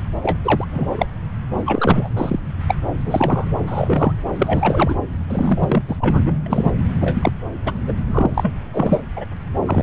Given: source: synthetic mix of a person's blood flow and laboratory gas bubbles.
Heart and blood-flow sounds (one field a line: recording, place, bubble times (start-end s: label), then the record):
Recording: Doppler ultrasound of blood flow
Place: subclavian vein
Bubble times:
0.00-0.03 s: bubbles
0.22-0.37 s: bubbles
0.43-0.65 s: bubbles
0.72-1.06 s: bubbles
1.53-2.09 s: bubbles
2.17-2.40 s: bubbles
2.67-2.75 s: bubbles
3.05-3.51 s: bubbles
3.67-4.12 s: bubbles
4.34-4.95 s: bubbles
5.29-5.83 s: bubbles
5.88-5.96 s: bubbles
6.00-6.33 s: bubbles
6.46-6.71 s: bubbles
7.01-7.32 s: bubbles
7.66-7.73 s: bubbles
7.87-7.93 s: bubbles
8.08-8.57 s: bubbles
8.73-9.02 s: bubbles
9.16-9.25 s: bubbles
9.66-9.83 s: bubbles
From the record:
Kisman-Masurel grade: 243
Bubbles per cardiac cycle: several, 3 to 8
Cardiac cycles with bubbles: 100%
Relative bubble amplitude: loud (0.450 to 0.775)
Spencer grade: 3 (all of the cardiac periods contain showers or single bubble signals, but not dominating or overriding the cardiac motion signals)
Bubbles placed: anywhere in the cardiac cycle